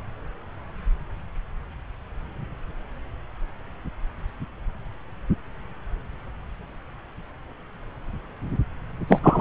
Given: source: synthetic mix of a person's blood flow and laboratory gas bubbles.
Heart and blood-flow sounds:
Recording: Doppler ultrasound of blood flow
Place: subclavian vein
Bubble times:
9.09-9.19 s: bubbles
9.23-9.41 s: bubbles
From the record:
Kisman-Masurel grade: 223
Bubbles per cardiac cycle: several, 3 to 8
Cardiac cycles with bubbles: 10 to 50%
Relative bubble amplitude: loud (0.450 to 0.775)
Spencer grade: 2 (many but less than half of the cardiac periods contain bubble signals, singularly or in groups)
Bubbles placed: anywhere in the cardiac cycle

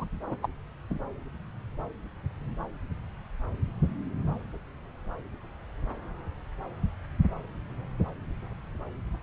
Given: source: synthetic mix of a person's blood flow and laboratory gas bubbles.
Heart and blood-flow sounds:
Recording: Doppler ultrasound of blood flow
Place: subclavian vein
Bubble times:
0.00-0.05 s: bubbles
0.27-0.36 s: bubbles
0.41-0.49 s: bubbles
0.90-0.98 s: bubbles
From the record:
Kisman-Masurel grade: 221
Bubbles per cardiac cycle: several, 3 to 8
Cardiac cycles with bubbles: 10 to 50%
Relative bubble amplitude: barely perceptible (0.100 to 0.250)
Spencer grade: 2 (many but less than half of the cardiac periods contain bubble signals, singularly or in groups)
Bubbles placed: anywhere in the cardiac cycle

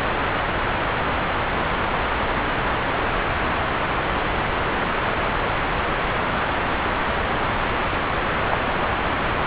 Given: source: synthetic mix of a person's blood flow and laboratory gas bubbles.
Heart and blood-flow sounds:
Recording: Doppler ultrasound of blood flow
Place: subclavian vein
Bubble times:
8.51-8.59 s: bubbles
From the record:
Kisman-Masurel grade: 111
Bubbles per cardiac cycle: 1 to 2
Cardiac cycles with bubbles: 1 to 10%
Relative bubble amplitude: barely perceptible (0.100 to 0.250)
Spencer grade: 1 (occasional bubble signal discernible with the cardiac motion signal, with majority of cardiac periods free of bubbles)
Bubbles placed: anywhere in the cardiac cycle

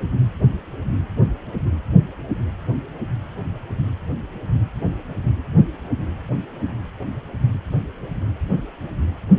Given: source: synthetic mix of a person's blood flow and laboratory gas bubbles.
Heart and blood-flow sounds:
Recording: Doppler ultrasound of blood flow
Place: precordium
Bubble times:
no bubbles
From the record:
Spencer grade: 0 (complete lack of bubble signals)

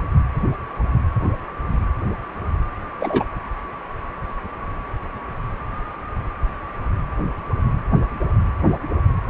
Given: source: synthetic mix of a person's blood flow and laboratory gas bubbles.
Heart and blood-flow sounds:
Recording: Doppler ultrasound of blood flow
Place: precordium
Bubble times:
3.00-3.24 s: bubbles
From the record:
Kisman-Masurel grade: 113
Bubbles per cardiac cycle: 1 to 2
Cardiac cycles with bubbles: 1 to 10%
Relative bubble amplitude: loud (0.450 to 0.775)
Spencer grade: 1 (occasional bubble signal discernible with the cardiac motion signal, with majority of cardiac periods free of bubbles)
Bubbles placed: anywhere in the cardiac cycle

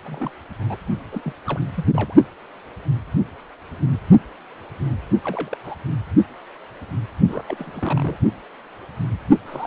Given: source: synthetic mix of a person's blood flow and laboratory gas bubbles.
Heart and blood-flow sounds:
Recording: Doppler ultrasound of blood flow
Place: precordium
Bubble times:
0.04-0.31 s: bubbles
0.66-0.77 s: bubbles
1.11-1.22 s: bubbles
1.25-1.33 s: bubbles
1.47-1.59 s: bubbles
1.76-1.85 s: bubbles
1.92-2.15 s: bubbles
5.24-5.57 s: bubbles
5.64-5.76 s: bubbles
7.28-7.44 s: bubbles
7.48-8.17 s: bubbles
9.46-9.67 s: bubbles
From the record:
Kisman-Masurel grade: 221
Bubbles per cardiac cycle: several, 3 to 8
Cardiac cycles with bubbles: 10 to 50%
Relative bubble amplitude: barely perceptible (0.100 to 0.250)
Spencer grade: 2 (many but less than half of the cardiac periods contain bubble signals, singularly or in groups)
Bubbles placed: only in the low amplitude regions of the cardiac cycle

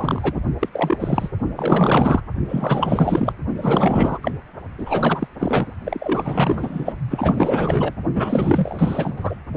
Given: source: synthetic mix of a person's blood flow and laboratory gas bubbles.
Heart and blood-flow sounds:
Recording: Doppler ultrasound of blood flow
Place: precordium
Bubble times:
0.00-0.41 s: bubbles
0.60-0.68 s: bubbles
0.71-1.29 s: bubbles
1.56-2.21 s: bubbles
2.49-3.33 s: bubbles
3.57-4.19 s: bubbles
4.22-4.31 s: bubbles
4.78-5.27 s: bubbles
5.39-5.67 s: bubbles
5.85-6.97 s: bubbles
7.09-7.94 s: bubbles
8.15-9.36 s: bubbles
From the record:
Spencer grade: 4 (maximum detectable bubble signal sounding continuously throughout systole and diastole of every cardiac period, and overriding the amplitude of the normal cardiac signals)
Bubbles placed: only in the low amplitude regions of the cardiac cycle

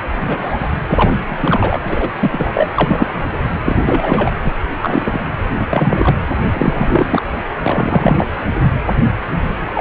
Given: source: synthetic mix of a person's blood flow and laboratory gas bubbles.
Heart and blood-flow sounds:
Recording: Doppler ultrasound of blood flow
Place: precordium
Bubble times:
0.19-0.68 s: bubbles
0.88-1.11 s: bubbles
1.25-1.79 s: bubbles
1.84-2.09 s: bubbles
2.20-2.68 s: bubbles
2.76-3.26 s: bubbles
3.65-4.31 s: bubbles
4.43-4.51 s: bubbles
4.79-5.27 s: bubbles
5.59-5.65 s: bubbles
5.70-6.18 s: bubbles
6.53-7.22 s: bubbles
7.62-8.26 s: bubbles
9.74-9.81 s: bubbles
From the record:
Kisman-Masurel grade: 233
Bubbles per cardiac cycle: several, 3 to 8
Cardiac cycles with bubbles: 50 to 99%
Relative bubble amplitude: loud (0.450 to 0.775)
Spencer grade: 3 (all of the cardiac periods contain showers or single bubble signals, but not dominating or overriding the cardiac motion signals)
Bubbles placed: anywhere in the cardiac cycle

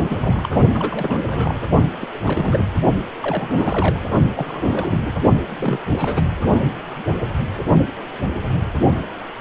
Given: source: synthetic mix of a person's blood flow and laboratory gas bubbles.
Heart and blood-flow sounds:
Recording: Doppler ultrasound of blood flow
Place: precordium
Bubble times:
0.00-0.49 s: bubbles
0.74-1.67 s: bubbles
2.00-2.07 s: bubbles
2.14-2.19 s: bubbles
2.23-2.68 s: bubbles
3.17-4.00 s: bubbles
4.34-5.18 s: bubbles
5.46-5.81 s: bubbles
5.91-6.22 s: bubbles
From the record:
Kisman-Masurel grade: 332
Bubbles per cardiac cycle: rolling drumbeat, 9 or more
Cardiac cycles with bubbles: 50 to 99%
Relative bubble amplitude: moderate (0.250 to 0.450)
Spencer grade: 3 (all of the cardiac periods contain showers or single bubble signals, but not dominating or overriding the cardiac motion signals)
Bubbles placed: only in the low amplitude regions of the cardiac cycle

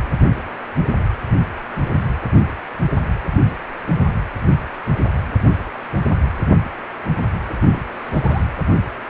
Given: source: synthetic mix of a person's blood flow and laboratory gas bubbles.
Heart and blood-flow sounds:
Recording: Doppler ultrasound of blood flow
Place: precordium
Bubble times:
7.47-7.55 s: bubbles
7.62-7.69 s: bubbles
7.73-7.83 s: bubbles
7.92-8.43 s: bubbles
From the record:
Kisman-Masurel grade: 211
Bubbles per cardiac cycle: several, 3 to 8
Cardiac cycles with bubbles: 1 to 10%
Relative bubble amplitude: barely perceptible (0.100 to 0.250)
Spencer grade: 1 (occasional bubble signal discernible with the cardiac motion signal, with majority of cardiac periods free of bubbles)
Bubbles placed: anywhere in the cardiac cycle

